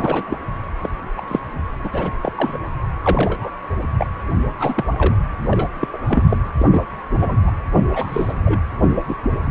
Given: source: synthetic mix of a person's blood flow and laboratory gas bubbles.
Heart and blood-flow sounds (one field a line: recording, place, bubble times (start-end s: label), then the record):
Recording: Doppler ultrasound of blood flow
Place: precordium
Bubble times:
0.00-0.39 s: bubbles
0.83-0.89 s: bubbles
1.17-1.22 s: bubbles
1.27-1.40 s: bubbles
1.84-1.90 s: bubbles
1.92-2.10 s: bubbles
2.23-2.32 s: bubbles
2.36-2.57 s: bubbles
3.02-3.50 s: bubbles
3.98-4.07 s: bubbles
4.59-4.74 s: bubbles
4.77-4.85 s: bubbles
4.98-5.15 s: bubbles
5.51-5.69 s: bubbles
5.81-5.88 s: bubbles
5.93-5.98 s: bubbles
6.06-6.27 s: bubbles
6.29-6.37 s: bubbles
6.59-6.67 s: bubbles
6.71-6.83 s: bubbles
7.21-7.37 s: bubbles
7.47-7.52 s: bubbles
7.76-7.82 s: bubbles
7.93-8.33 s: bubbles
8.45-8.60 s: bubbles
9.07-9.15 s: bubbles
From the record:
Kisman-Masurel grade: 242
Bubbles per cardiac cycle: several, 3 to 8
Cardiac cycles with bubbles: 100%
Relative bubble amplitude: moderate (0.250 to 0.450)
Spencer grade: 3 (all of the cardiac periods contain showers or single bubble signals, but not dominating or overriding the cardiac motion signals)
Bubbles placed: anywhere in the cardiac cycle